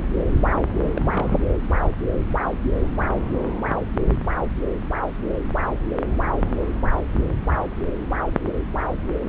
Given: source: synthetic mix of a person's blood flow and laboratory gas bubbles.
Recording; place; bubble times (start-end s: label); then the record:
Doppler ultrasound of blood flow; subclavian vein
0.75-0.93 s: bubbles
0.96-1.39 s: bubbles
From the record:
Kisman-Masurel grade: 211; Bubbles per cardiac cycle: several, 3 to 8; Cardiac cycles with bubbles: 1 to 10%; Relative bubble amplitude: barely perceptible (0.100 to 0.250); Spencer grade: 1 (occasional bubble signal discernible with the cardiac motion signal, with majority of cardiac periods free of bubbles); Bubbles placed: anywhere in the cardiac cycle